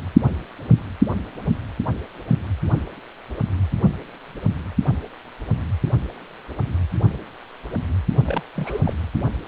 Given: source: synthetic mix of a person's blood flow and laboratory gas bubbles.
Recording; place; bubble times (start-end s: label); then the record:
Doppler ultrasound of blood flow; precordium
8.26-8.43 s: bubbles
8.56-8.81 s: bubbles
8.85-8.94 s: bubbles
From the record:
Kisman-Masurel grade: 221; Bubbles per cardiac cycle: several, 3 to 8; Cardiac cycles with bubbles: 10 to 50%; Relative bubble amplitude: barely perceptible (0.100 to 0.250); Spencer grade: 2 (many but less than half of the cardiac periods contain bubble signals, singularly or in groups); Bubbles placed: only in the low amplitude regions of the cardiac cycle